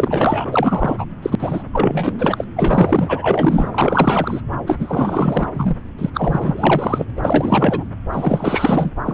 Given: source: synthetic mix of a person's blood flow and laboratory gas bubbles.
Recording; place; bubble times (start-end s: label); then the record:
Doppler ultrasound of blood flow; subclavian vein
0.00-1.05 s: bubbles
1.22-1.35 s: bubbles
1.38-1.63 s: bubbles
1.73-2.44 s: bubbles
2.56-4.42 s: bubbles
4.67-5.49 s: bubbles
5.54-5.75 s: bubbles
5.98-6.10 s: bubbles
6.14-7.11 s: bubbles
7.17-7.83 s: bubbles
8.12-8.91 s: bubbles
9.04-9.14 s: bubbles
From the record:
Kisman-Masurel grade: 444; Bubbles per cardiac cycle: continuous sound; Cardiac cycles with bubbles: 100%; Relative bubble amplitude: maximal (0.775 to 0.999); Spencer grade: 4 (maximum detectable bubble signal sounding continuously throughout systole and diastole of every cardiac period, and overriding the amplitude of the normal cardiac signals); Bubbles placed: anywhere in the cardiac cycle